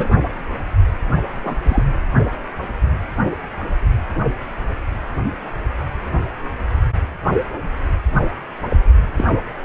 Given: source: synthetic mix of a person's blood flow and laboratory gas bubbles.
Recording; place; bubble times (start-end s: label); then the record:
Doppler ultrasound of blood flow; precordium
0.00-0.08 s: bubbles
1.43-1.56 s: bubbles
1.68-1.83 s: bubbles
8.70-8.77 s: bubbles
9.16-9.24 s: bubbles
From the record:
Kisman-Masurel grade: 122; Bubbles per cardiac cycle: 1 to 2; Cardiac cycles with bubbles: 10 to 50%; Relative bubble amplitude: moderate (0.250 to 0.450); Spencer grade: 2 (many but less than half of the cardiac periods contain bubble signals, singularly or in groups); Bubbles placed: anywhere in the cardiac cycle